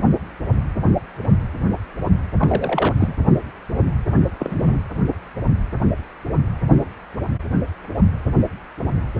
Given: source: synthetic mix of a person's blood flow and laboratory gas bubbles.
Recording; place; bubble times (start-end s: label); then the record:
Doppler ultrasound of blood flow; precordium
2.38-2.94 s: bubbles
2.98-3.14 s: bubbles
4.39-4.82 s: bubbles
From the record:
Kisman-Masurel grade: 222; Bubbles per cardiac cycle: several, 3 to 8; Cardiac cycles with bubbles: 10 to 50%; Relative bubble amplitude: moderate (0.250 to 0.450); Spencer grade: 2 (many but less than half of the cardiac periods contain bubble signals, singularly or in groups); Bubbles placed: anywhere in the cardiac cycle